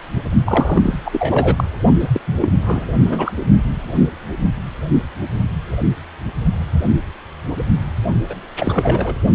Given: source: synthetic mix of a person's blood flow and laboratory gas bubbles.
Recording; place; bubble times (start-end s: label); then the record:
Doppler ultrasound of blood flow; precordium
0.44-0.98 s: bubbles
1.05-1.64 s: bubbles
2.00-2.09 s: bubbles
2.13-2.20 s: bubbles
2.27-2.34 s: bubbles
2.41-2.48 s: bubbles
2.60-2.86 s: bubbles
3.05-3.32 s: bubbles
8.29-8.35 s: bubbles
8.59-9.16 s: bubbles
From the record:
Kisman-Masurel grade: 332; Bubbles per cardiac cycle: rolling drumbeat, 9 or more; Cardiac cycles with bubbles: 50 to 99%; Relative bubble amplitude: moderate (0.250 to 0.450); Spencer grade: 3 (all of the cardiac periods contain showers or single bubble signals, but not dominating or overriding the cardiac motion signals); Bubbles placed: only in the low amplitude regions of the cardiac cycle